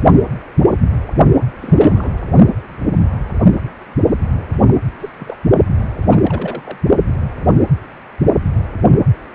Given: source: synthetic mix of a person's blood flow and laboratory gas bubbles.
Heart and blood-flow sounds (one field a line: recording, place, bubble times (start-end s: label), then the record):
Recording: Doppler ultrasound of blood flow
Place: precordium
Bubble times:
1.62-2.12 s: bubbles
4.50-4.62 s: bubbles
4.66-4.79 s: bubbles
5.00-5.09 s: bubbles
5.19-5.36 s: bubbles
6.11-6.78 s: bubbles
From the record:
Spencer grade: 2 (many but less than half of the cardiac periods contain bubble signals, singularly or in groups)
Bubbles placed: only in the low amplitude regions of the cardiac cycle